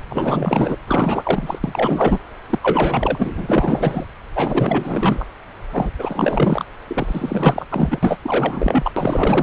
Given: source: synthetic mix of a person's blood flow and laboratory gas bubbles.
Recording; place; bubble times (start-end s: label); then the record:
Doppler ultrasound of blood flow; subclavian vein
0.09-0.77 s: bubbles
0.86-1.59 s: bubbles
1.64-2.20 s: bubbles
2.49-2.59 s: bubbles
2.62-4.05 s: bubbles
4.34-5.26 s: bubbles
5.72-5.91 s: bubbles
5.98-6.65 s: bubbles
6.87-7.65 s: bubbles
7.70-7.99 s: bubbles
8.03-8.91 s: bubbles
8.96-9.43 s: bubbles
From the record:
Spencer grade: 4 (maximum detectable bubble signal sounding continuously throughout systole and diastole of every cardiac period, and overriding the amplitude of the normal cardiac signals); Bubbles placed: anywhere in the cardiac cycle